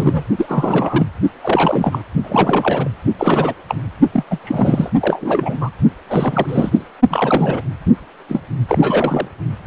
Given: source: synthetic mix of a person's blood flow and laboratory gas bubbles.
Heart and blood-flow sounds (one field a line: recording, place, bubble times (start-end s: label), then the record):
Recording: Doppler ultrasound of blood flow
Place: precordium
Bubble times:
0.00-0.23 s: bubbles
0.37-1.07 s: bubbles
1.42-2.02 s: bubbles
2.24-2.92 s: bubbles
3.18-3.54 s: bubbles
3.69-3.75 s: bubbles
4.13-4.24 s: bubbles
4.30-4.39 s: bubbles
4.44-4.90 s: bubbles
5.00-5.58 s: bubbles
5.61-5.70 s: bubbles
6.07-6.46 s: bubbles
6.49-6.85 s: bubbles
7.10-7.62 s: bubbles
8.29-8.42 s: bubbles
8.68-9.30 s: bubbles
From the record:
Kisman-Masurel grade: 343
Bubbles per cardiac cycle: rolling drumbeat, 9 or more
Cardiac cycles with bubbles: 100%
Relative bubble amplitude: loud (0.450 to 0.775)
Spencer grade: 3 (all of the cardiac periods contain showers or single bubble signals, but not dominating or overriding the cardiac motion signals)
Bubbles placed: only in the low amplitude regions of the cardiac cycle